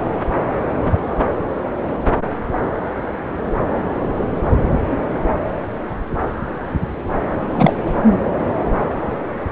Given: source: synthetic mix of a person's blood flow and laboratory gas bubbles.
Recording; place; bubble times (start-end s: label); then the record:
Doppler ultrasound of blood flow; subclavian vein
7.55-7.73 s: bubbles
7.86-7.95 s: bubbles
From the record:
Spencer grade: 2 (many but less than half of the cardiac periods contain bubble signals, singularly or in groups); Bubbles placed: anywhere in the cardiac cycle